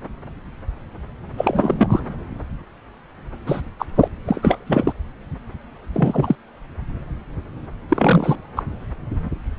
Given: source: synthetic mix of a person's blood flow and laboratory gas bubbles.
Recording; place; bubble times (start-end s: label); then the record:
Doppler ultrasound of blood flow; subclavian vein
1.37-2.01 s: bubbles
3.46-3.61 s: bubbles
3.79-3.85 s: bubbles
3.96-4.08 s: bubbles
4.25-4.93 s: bubbles
5.93-6.35 s: bubbles
7.88-8.37 s: bubbles
8.55-8.63 s: bubbles
From the record:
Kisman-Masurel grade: 223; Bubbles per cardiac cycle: several, 3 to 8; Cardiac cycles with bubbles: 10 to 50%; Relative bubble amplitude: loud (0.450 to 0.775); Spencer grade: 2 (many but less than half of the cardiac periods contain bubble signals, singularly or in groups); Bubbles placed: anywhere in the cardiac cycle